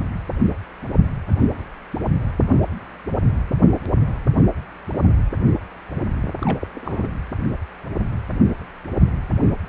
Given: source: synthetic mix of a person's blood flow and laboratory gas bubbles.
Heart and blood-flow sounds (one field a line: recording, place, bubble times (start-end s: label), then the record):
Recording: Doppler ultrasound of blood flow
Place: precordium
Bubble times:
6.40-6.58 s: bubbles
6.60-6.67 s: bubbles
6.75-7.10 s: bubbles
From the record:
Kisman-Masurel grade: 211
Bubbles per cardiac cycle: several, 3 to 8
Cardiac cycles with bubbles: 1 to 10%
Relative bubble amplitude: barely perceptible (0.100 to 0.250)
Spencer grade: 1 (occasional bubble signal discernible with the cardiac motion signal, with majority of cardiac periods free of bubbles)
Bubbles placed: anywhere in the cardiac cycle